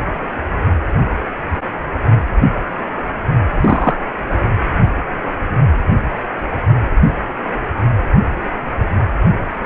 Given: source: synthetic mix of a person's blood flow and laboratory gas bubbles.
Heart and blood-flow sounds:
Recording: Doppler ultrasound of blood flow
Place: precordium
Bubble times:
3.60-3.95 s: bubbles
From the record:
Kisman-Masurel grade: 113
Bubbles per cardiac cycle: 1 to 2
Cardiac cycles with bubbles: 1 to 10%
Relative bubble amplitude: loud (0.450 to 0.775)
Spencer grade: 1 (occasional bubble signal discernible with the cardiac motion signal, with majority of cardiac periods free of bubbles)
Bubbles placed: only in the low amplitude regions of the cardiac cycle

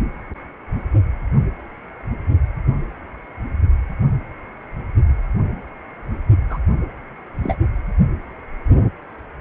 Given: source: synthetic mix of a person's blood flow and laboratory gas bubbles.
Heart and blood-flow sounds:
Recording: Doppler ultrasound of blood flow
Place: precordium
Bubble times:
6.50-6.58 s: bubbles
7.44-7.56 s: bubbles
From the record:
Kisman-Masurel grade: 112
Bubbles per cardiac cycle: 1 to 2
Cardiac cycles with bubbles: 1 to 10%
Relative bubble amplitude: moderate (0.250 to 0.450)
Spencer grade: 1 (occasional bubble signal discernible with the cardiac motion signal, with majority of cardiac periods free of bubbles)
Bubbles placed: only in the low amplitude regions of the cardiac cycle

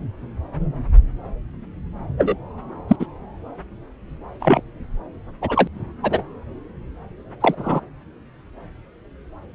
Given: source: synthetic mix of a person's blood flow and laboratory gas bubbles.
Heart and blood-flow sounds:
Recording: Doppler ultrasound of blood flow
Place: subclavian vein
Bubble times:
2.18-2.35 s: bubbles
2.89-2.96 s: bubbles
3.00-3.06 s: bubbles
4.40-4.61 s: bubbles
5.42-5.67 s: bubbles
6.02-6.23 s: bubbles
7.40-7.55 s: bubbles
7.59-7.80 s: bubbles
From the record:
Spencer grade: 2 (many but less than half of the cardiac periods contain bubble signals, singularly or in groups)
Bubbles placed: anywhere in the cardiac cycle

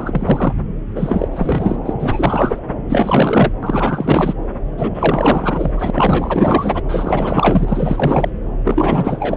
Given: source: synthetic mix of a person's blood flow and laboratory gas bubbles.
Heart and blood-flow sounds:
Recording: Doppler ultrasound of blood flow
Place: subclavian vein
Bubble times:
0.00-0.53 s: bubbles
0.95-1.28 s: bubbles
1.31-1.76 s: bubbles
1.85-1.94 s: bubbles
1.99-2.59 s: bubbles
2.89-3.52 s: bubbles
3.62-4.33 s: bubbles
4.77-5.71 s: bubbles
5.75-5.91 s: bubbles
5.93-6.83 s: bubbles
6.88-8.29 s: bubbles
8.64-9.37 s: bubbles
From the record:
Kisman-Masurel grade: 444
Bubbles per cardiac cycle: continuous sound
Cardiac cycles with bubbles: 100%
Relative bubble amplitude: maximal (0.775 to 0.999)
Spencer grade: 4 (maximum detectable bubble signal sounding continuously throughout systole and diastole of every cardiac period, and overriding the amplitude of the normal cardiac signals)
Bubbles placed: anywhere in the cardiac cycle

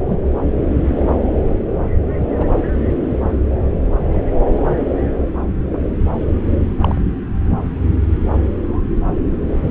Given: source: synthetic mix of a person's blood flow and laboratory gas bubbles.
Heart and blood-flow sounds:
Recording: Doppler ultrasound of blood flow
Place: subclavian vein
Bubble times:
0.04-0.17 s: bubbles
2.38-2.47 s: bubbles
6.79-7.01 s: bubbles
From the record:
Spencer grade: 2 (many but less than half of the cardiac periods contain bubble signals, singularly or in groups)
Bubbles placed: anywhere in the cardiac cycle

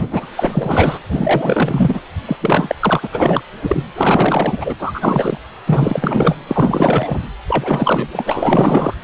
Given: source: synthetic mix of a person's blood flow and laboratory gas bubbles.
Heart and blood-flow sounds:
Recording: Doppler ultrasound of blood flow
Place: precordium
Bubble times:
0.00-0.26 s: bubbles
0.29-0.31 s: bubbles
0.36-0.99 s: bubbles
1.10-2.00 s: bubbles
2.25-2.36 s: bubbles
2.41-2.75 s: bubbles
2.79-3.09 s: bubbles
3.12-3.42 s: bubbles
3.62-3.86 s: bubbles
3.95-4.75 s: bubbles
4.79-5.38 s: bubbles
5.66-6.37 s: bubbles
6.48-7.26 s: bubbles
7.47-8.94 s: bubbles
From the record:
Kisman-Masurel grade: 444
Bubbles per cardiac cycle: continuous sound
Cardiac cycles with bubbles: 100%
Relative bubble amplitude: maximal (0.775 to 0.999)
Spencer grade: 4 (maximum detectable bubble signal sounding continuously throughout systole and diastole of every cardiac period, and overriding the amplitude of the normal cardiac signals)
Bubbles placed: anywhere in the cardiac cycle

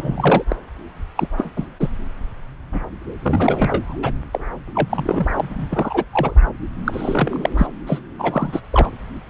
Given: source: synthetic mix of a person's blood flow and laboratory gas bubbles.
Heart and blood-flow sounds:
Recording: Doppler ultrasound of blood flow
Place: subclavian vein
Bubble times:
0.00-0.44 s: bubbles
0.48-0.56 s: bubbles
1.16-1.28 s: bubbles
1.37-1.51 s: bubbles
1.56-1.67 s: bubbles
1.79-1.89 s: bubbles
2.73-2.81 s: bubbles
3.22-3.96 s: bubbles
4.02-4.12 s: bubbles
4.33-4.41 s: bubbles
4.75-5.27 s: bubbles
5.38-5.49 s: bubbles
5.58-5.67 s: bubbles
5.70-6.04 s: bubbles
6.10-6.38 s: bubbles
6.84-7.50 s: bubbles
7.58-7.67 s: bubbles
7.86-8.01 s: bubbles
8.18-8.60 s: bubbles
8.72-8.90 s: bubbles
From the record:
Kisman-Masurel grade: 242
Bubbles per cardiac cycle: several, 3 to 8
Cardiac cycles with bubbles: 100%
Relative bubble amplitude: moderate (0.250 to 0.450)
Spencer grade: 3 (all of the cardiac periods contain showers or single bubble signals, but not dominating or overriding the cardiac motion signals)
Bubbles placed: anywhere in the cardiac cycle

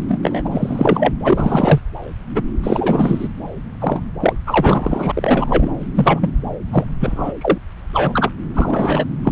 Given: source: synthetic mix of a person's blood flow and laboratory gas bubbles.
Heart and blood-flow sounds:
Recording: Doppler ultrasound of blood flow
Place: subclavian vein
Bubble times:
0.08-0.18 s: bubbles
0.23-0.42 s: bubbles
0.45-1.12 s: bubbles
1.23-1.80 s: bubbles
2.35-2.42 s: bubbles
2.62-3.27 s: bubbles
3.81-4.00 s: bubbles
4.20-4.33 s: bubbles
4.47-5.12 s: bubbles
5.15-5.71 s: bubbles
5.95-6.31 s: bubbles
6.71-6.85 s: bubbles
7.00-7.33 s: bubbles
7.41-7.58 s: bubbles
7.93-8.29 s: bubbles
8.54-9.05 s: bubbles
9.23-9.32 s: bubbles
From the record:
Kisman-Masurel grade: 333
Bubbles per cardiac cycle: rolling drumbeat, 9 or more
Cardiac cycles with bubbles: 50 to 99%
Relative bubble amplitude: loud (0.450 to 0.775)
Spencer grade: 3 (all of the cardiac periods contain showers or single bubble signals, but not dominating or overriding the cardiac motion signals)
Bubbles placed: anywhere in the cardiac cycle

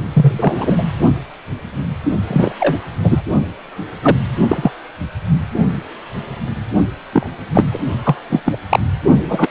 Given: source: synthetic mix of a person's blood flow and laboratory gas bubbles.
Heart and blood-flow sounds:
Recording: Doppler ultrasound of blood flow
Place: precordium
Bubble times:
0.13-0.84 s: bubbles
2.27-2.53 s: bubbles
2.59-2.77 s: bubbles
3.03-3.21 s: bubbles
4.02-4.16 s: bubbles
4.49-4.71 s: bubbles
7.13-7.28 s: bubbles
7.54-7.64 s: bubbles
7.71-7.78 s: bubbles
8.04-8.16 s: bubbles
8.29-8.42 s: bubbles
8.45-8.58 s: bubbles
8.70-8.79 s: bubbles
9.28-9.50 s: bubbles
From the record:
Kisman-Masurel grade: 233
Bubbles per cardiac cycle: several, 3 to 8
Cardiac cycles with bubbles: 50 to 99%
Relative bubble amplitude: loud (0.450 to 0.775)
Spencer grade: 3 (all of the cardiac periods contain showers or single bubble signals, but not dominating or overriding the cardiac motion signals)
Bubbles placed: only in the low amplitude regions of the cardiac cycle

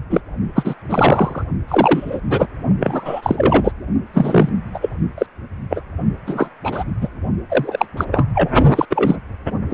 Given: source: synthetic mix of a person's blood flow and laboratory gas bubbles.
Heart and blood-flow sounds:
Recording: Doppler ultrasound of blood flow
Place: precordium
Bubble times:
0.09-0.23 s: bubbles
0.55-0.74 s: bubbles
0.89-1.44 s: bubbles
1.68-2.20 s: bubbles
2.30-2.47 s: bubbles
2.80-3.72 s: bubbles
4.13-4.49 s: bubbles
4.73-4.78 s: bubbles
4.82-4.89 s: bubbles
5.17-5.26 s: bubbles
5.70-5.81 s: bubbles
6.26-6.50 s: bubbles
6.63-6.83 s: bubbles
7.01-7.09 s: bubbles
7.50-7.85 s: bubbles
7.97-8.04 s: bubbles
8.12-8.25 s: bubbles
8.34-8.50 s: bubbles
8.75-8.86 s: bubbles
8.90-9.16 s: bubbles
9.70-9.74 s: bubbles
From the record:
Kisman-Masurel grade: 243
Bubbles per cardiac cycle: several, 3 to 8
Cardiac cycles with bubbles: 100%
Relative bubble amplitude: loud (0.450 to 0.775)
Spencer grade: 3 (all of the cardiac periods contain showers or single bubble signals, but not dominating or overriding the cardiac motion signals)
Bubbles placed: only in the low amplitude regions of the cardiac cycle

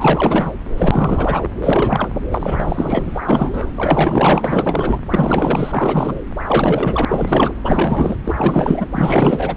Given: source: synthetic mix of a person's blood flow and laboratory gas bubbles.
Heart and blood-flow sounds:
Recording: Doppler ultrasound of blood flow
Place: subclavian vein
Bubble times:
0.00-0.52 s: bubbles
0.77-1.49 s: bubbles
1.60-2.08 s: bubbles
2.29-3.21 s: bubbles
3.28-3.71 s: bubbles
3.76-4.98 s: bubbles
5.10-6.20 s: bubbles
6.46-7.05 s: bubbles
7.08-7.53 s: bubbles
7.62-8.16 s: bubbles
8.25-8.85 s: bubbles
8.91-9.57 s: bubbles
From the record:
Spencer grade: 4 (maximum detectable bubble signal sounding continuously throughout systole and diastole of every cardiac period, and overriding the amplitude of the normal cardiac signals)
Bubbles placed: anywhere in the cardiac cycle

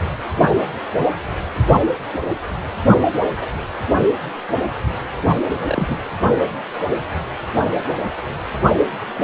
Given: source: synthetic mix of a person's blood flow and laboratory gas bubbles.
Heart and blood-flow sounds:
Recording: Doppler ultrasound of blood flow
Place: precordium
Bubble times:
5.66-5.98 s: bubbles
From the record:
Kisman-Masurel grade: 222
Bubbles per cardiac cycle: several, 3 to 8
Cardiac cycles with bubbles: 10 to 50%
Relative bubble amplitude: moderate (0.250 to 0.450)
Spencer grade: 2 (many but less than half of the cardiac periods contain bubble signals, singularly or in groups)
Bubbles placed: only in the low amplitude regions of the cardiac cycle

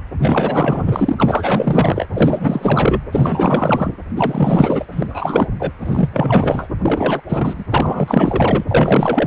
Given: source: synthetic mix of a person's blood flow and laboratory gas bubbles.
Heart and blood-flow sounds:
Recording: Doppler ultrasound of blood flow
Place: precordium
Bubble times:
0.18-2.06 s: bubbles
2.13-3.01 s: bubbles
3.12-3.90 s: bubbles
4.16-4.86 s: bubbles
4.91-5.48 s: bubbles
5.59-5.72 s: bubbles
5.80-6.09 s: bubbles
6.12-6.67 s: bubbles
6.82-7.21 s: bubbles
7.28-7.54 s: bubbles
7.58-7.64 s: bubbles
7.70-8.64 s: bubbles
8.67-9.27 s: bubbles
From the record:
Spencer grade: 4 (maximum detectable bubble signal sounding continuously throughout systole and diastole of every cardiac period, and overriding the amplitude of the normal cardiac signals)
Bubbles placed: anywhere in the cardiac cycle

